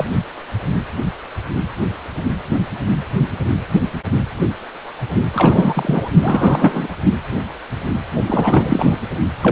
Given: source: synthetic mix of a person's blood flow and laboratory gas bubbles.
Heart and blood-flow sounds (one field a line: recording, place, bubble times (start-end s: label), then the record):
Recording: Doppler ultrasound of blood flow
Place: precordium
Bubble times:
0.00-0.05 s: bubbles
5.34-6.08 s: bubbles
6.21-6.88 s: bubbles
8.27-8.97 s: bubbles
9.42-9.52 s: bubbles
From the record:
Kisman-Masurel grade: 333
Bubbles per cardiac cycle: rolling drumbeat, 9 or more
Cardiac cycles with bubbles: 50 to 99%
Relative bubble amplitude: loud (0.450 to 0.775)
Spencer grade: 3 (all of the cardiac periods contain showers or single bubble signals, but not dominating or overriding the cardiac motion signals)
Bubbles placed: only in the low amplitude regions of the cardiac cycle